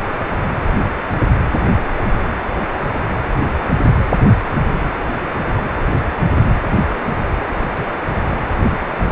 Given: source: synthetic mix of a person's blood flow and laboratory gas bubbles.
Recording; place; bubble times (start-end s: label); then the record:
Doppler ultrasound of blood flow; precordium
no bubbles
From the record:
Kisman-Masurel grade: 000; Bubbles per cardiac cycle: 0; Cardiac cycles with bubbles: 0%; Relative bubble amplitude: no bubbles discernible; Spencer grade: 0 (complete lack of bubble signals)